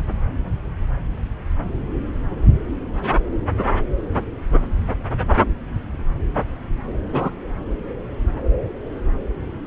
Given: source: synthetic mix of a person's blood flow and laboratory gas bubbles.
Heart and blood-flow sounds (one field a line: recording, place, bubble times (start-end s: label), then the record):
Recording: Doppler ultrasound of blood flow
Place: subclavian vein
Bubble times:
7.12-7.31 s: bubbles
From the record:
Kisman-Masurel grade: 112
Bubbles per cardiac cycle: 1 to 2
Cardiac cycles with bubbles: 1 to 10%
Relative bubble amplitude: moderate (0.250 to 0.450)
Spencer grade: 1 (occasional bubble signal discernible with the cardiac motion signal, with majority of cardiac periods free of bubbles)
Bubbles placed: anywhere in the cardiac cycle